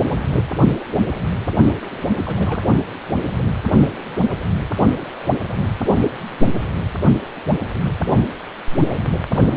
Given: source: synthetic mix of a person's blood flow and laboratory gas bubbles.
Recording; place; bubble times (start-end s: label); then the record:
Doppler ultrasound of blood flow; precordium
1.90-2.67 s: bubbles
From the record:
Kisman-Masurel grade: 211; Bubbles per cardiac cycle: several, 3 to 8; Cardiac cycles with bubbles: 1 to 10%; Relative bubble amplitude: barely perceptible (0.100 to 0.250); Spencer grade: 1 (occasional bubble signal discernible with the cardiac motion signal, with majority of cardiac periods free of bubbles); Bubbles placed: only in the low amplitude regions of the cardiac cycle